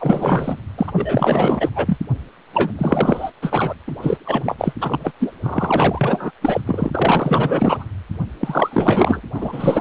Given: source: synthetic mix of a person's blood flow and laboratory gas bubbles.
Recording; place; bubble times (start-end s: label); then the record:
Doppler ultrasound of blood flow; precordium
0.00-0.57 s: bubbles
0.78-1.70 s: bubbles
1.75-1.97 s: bubbles
2.52-2.70 s: bubbles
2.78-3.31 s: bubbles
3.42-3.74 s: bubbles
3.87-3.96 s: bubbles
4.01-4.17 s: bubbles
4.25-4.55 s: bubbles
4.58-4.73 s: bubbles
4.81-5.12 s: bubbles
5.20-5.31 s: bubbles
5.42-6.31 s: bubbles
6.41-6.61 s: bubbles
6.66-7.85 s: bubbles
8.41-9.21 s: bubbles
9.34-9.81 s: bubbles
From the record:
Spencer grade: 4 (maximum detectable bubble signal sounding continuously throughout systole and diastole of every cardiac period, and overriding the amplitude of the normal cardiac signals); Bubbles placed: anywhere in the cardiac cycle